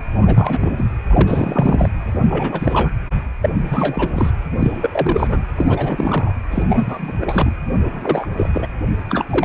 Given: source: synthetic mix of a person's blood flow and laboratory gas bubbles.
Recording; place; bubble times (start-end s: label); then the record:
Doppler ultrasound of blood flow; precordium
0.21-0.74 s: bubbles
0.77-0.85 s: bubbles
1.07-1.90 s: bubbles
2.29-2.91 s: bubbles
3.41-3.50 s: bubbles
3.70-4.31 s: bubbles
4.59-5.45 s: bubbles
5.55-6.34 s: bubbles
6.50-6.65 s: bubbles
6.70-7.16 s: bubbles
7.21-7.53 s: bubbles
7.83-8.26 s: bubbles
8.37-8.49 s: bubbles
8.53-8.67 s: bubbles
9.09-9.25 s: bubbles
9.30-9.45 s: bubbles
From the record:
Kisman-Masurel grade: 342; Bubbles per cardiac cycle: rolling drumbeat, 9 or more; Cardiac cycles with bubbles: 100%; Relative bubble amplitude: moderate (0.250 to 0.450); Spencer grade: 3 (all of the cardiac periods contain showers or single bubble signals, but not dominating or overriding the cardiac motion signals); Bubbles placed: anywhere in the cardiac cycle